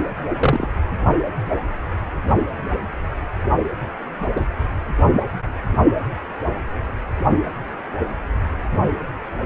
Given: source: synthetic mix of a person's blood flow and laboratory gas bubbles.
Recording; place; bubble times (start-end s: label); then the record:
Doppler ultrasound of blood flow; precordium
0.40-0.68 s: bubbles
4.35-4.40 s: bubbles
From the record:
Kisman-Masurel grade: 113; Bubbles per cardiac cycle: 1 to 2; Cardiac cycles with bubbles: 1 to 10%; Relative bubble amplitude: loud (0.450 to 0.775); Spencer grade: 1 (occasional bubble signal discernible with the cardiac motion signal, with majority of cardiac periods free of bubbles); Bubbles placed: anywhere in the cardiac cycle